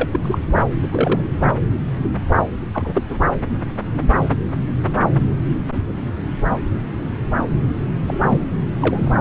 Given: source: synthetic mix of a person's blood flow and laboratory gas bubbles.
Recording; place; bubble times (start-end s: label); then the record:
Doppler ultrasound of blood flow; subclavian vein
0.01-0.08 s: bubbles
0.12-0.20 s: bubbles
0.22-0.39 s: bubbles
0.55-0.66 s: bubbles
0.82-0.88 s: bubbles
0.92-1.21 s: bubbles
2.74-3.22 s: bubbles
8.07-8.18 s: bubbles
8.22-8.42 s: bubbles
8.80-9.11 s: bubbles
From the record:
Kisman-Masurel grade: 232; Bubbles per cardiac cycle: several, 3 to 8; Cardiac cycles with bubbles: 50 to 99%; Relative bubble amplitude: moderate (0.250 to 0.450); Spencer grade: 3 (all of the cardiac periods contain showers or single bubble signals, but not dominating or overriding the cardiac motion signals); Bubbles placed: anywhere in the cardiac cycle